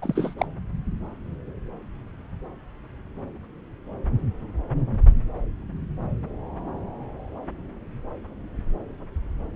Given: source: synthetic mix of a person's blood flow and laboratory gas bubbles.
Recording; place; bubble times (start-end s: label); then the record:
Doppler ultrasound of blood flow; subclavian vein
0.01-0.35 s: bubbles
0.38-0.46 s: bubbles
From the record:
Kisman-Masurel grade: 222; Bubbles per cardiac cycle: several, 3 to 8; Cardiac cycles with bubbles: 10 to 50%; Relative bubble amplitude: moderate (0.250 to 0.450); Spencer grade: 2 (many but less than half of the cardiac periods contain bubble signals, singularly or in groups); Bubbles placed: anywhere in the cardiac cycle